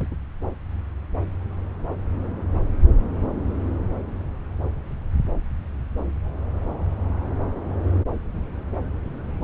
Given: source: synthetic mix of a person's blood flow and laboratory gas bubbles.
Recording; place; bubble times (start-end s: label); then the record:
Doppler ultrasound of blood flow; subclavian vein
0.00-0.08 s: bubbles
0.11-0.15 s: bubbles
From the record:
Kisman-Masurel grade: 211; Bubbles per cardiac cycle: several, 3 to 8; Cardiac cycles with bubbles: 1 to 10%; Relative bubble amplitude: barely perceptible (0.100 to 0.250); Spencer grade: 1 (occasional bubble signal discernible with the cardiac motion signal, with majority of cardiac periods free of bubbles); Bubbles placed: anywhere in the cardiac cycle